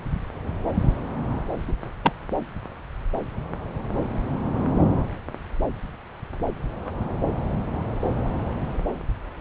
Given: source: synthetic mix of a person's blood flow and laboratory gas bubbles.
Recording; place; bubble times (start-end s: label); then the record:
Doppler ultrasound of blood flow; subclavian vein
1.68-1.73 s: bubbles
2.03-2.13 s: bubbles
From the record:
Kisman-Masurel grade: 112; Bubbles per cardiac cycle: 1 to 2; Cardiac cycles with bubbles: 1 to 10%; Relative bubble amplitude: moderate (0.250 to 0.450); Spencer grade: 1 (occasional bubble signal discernible with the cardiac motion signal, with majority of cardiac periods free of bubbles); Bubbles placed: anywhere in the cardiac cycle